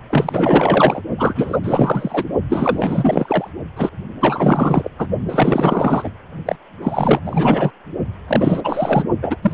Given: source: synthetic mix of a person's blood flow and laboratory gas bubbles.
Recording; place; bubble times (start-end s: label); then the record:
Doppler ultrasound of blood flow; precordium
0.10-1.01 s: bubbles
1.17-1.59 s: bubbles
1.63-2.24 s: bubbles
2.49-3.51 s: bubbles
3.77-3.90 s: bubbles
4.21-4.88 s: bubbles
4.98-5.08 s: bubbles
5.29-6.11 s: bubbles
6.46-6.56 s: bubbles
6.82-7.21 s: bubbles
7.25-7.71 s: bubbles
8.28-8.61 s: bubbles
8.64-9.04 s: bubbles
9.22-9.37 s: bubbles
9.42-9.54 s: bubbles
From the record:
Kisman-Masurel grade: 444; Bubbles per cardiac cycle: continuous sound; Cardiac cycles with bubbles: 100%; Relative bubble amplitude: maximal (0.775 to 0.999); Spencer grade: 4 (maximum detectable bubble signal sounding continuously throughout systole and diastole of every cardiac period, and overriding the amplitude of the normal cardiac signals); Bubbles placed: only in the low amplitude regions of the cardiac cycle